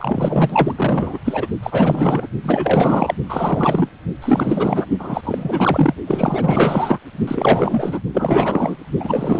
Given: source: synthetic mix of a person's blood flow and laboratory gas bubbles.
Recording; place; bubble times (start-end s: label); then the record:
Doppler ultrasound of blood flow; precordium
0.00-1.19 s: bubbles
1.25-1.47 s: bubbles
1.62-2.27 s: bubbles
2.43-3.14 s: bubbles
3.28-3.90 s: bubbles
4.21-4.87 s: bubbles
4.99-5.95 s: bubbles
6.07-6.99 s: bubbles
7.27-8.00 s: bubbles
8.13-8.77 s: bubbles
8.99-9.40 s: bubbles
From the record:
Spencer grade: 4 (maximum detectable bubble signal sounding continuously throughout systole and diastole of every cardiac period, and overriding the amplitude of the normal cardiac signals); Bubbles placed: only in the low amplitude regions of the cardiac cycle